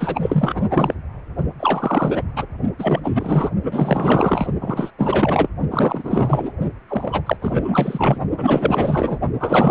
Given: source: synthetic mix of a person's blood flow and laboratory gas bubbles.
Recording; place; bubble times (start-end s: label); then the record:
Doppler ultrasound of blood flow; precordium
0.00-0.94 s: bubbles
1.59-2.23 s: bubbles
2.36-2.46 s: bubbles
2.78-3.00 s: bubbles
3.04-3.51 s: bubbles
3.63-4.47 s: bubbles
4.60-4.90 s: bubbles
4.98-5.49 s: bubbles
5.71-6.52 s: bubbles
6.88-7.21 s: bubbles
7.26-7.37 s: bubbles
7.42-8.19 s: bubbles
8.37-9.19 s: bubbles
9.39-9.71 s: bubbles
From the record:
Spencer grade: 4 (maximum detectable bubble signal sounding continuously throughout systole and diastole of every cardiac period, and overriding the amplitude of the normal cardiac signals); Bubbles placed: only in the low amplitude regions of the cardiac cycle